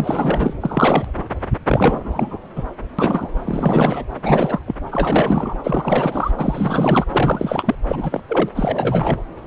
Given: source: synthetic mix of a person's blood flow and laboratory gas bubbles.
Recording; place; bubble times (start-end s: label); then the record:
Doppler ultrasound of blood flow; subclavian vein
0.00-0.54 s: bubbles
0.60-1.11 s: bubbles
1.17-1.23 s: bubbles
1.69-2.38 s: bubbles
2.56-2.64 s: bubbles
2.98-3.30 s: bubbles
3.44-4.04 s: bubbles
4.24-4.60 s: bubbles
4.67-4.75 s: bubbles
4.91-5.58 s: bubbles
5.64-6.31 s: bubbles
6.38-7.06 s: bubbles
7.12-7.75 s: bubbles
7.86-8.23 s: bubbles
8.29-8.49 s: bubbles
8.55-9.20 s: bubbles
From the record:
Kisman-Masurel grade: 342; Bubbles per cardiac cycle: rolling drumbeat, 9 or more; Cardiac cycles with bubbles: 100%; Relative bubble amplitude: moderate (0.250 to 0.450); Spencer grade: 3 (all of the cardiac periods contain showers or single bubble signals, but not dominating or overriding the cardiac motion signals); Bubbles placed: anywhere in the cardiac cycle